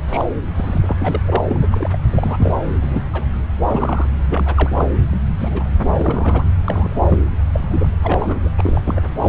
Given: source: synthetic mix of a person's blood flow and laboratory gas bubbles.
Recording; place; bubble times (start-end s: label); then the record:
Doppler ultrasound of blood flow; subclavian vein
0.07-0.26 s: bubbles
0.54-0.78 s: bubbles
0.81-1.22 s: bubbles
1.24-1.41 s: bubbles
1.48-1.58 s: bubbles
1.62-1.67 s: bubbles
1.71-1.97 s: bubbles
2.09-2.57 s: bubbles
2.80-3.09 s: bubbles
3.12-3.25 s: bubbles
3.67-4.09 s: bubbles
4.29-4.91 s: bubbles
5.12-5.17 s: bubbles
5.38-5.65 s: bubbles
5.80-6.44 s: bubbles
6.64-7.19 s: bubbles
7.54-7.87 s: bubbles
8.03-8.49 s: bubbles
8.57-9.02 s: bubbles
9.21-9.28 s: bubbles
From the record:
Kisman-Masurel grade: 232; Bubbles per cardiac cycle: several, 3 to 8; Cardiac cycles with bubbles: 50 to 99%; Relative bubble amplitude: moderate (0.250 to 0.450); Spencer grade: 3 (all of the cardiac periods contain showers or single bubble signals, but not dominating or overriding the cardiac motion signals); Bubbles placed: anywhere in the cardiac cycle